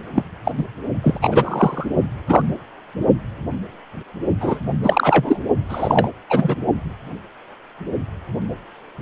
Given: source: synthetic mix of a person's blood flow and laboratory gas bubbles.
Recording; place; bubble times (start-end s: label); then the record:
Doppler ultrasound of blood flow; precordium
0.15-0.23 s: bubbles
0.44-0.51 s: bubbles
0.57-0.63 s: bubbles
1.03-1.19 s: bubbles
1.21-1.86 s: bubbles
2.27-2.42 s: bubbles
4.40-4.59 s: bubbles
4.83-5.41 s: bubbles
5.68-6.10 s: bubbles
6.29-6.55 s: bubbles
From the record:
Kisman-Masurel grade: 223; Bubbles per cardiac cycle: several, 3 to 8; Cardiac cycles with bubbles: 10 to 50%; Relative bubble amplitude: loud (0.450 to 0.775); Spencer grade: 2 (many but less than half of the cardiac periods contain bubble signals, singularly or in groups); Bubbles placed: only in the low amplitude regions of the cardiac cycle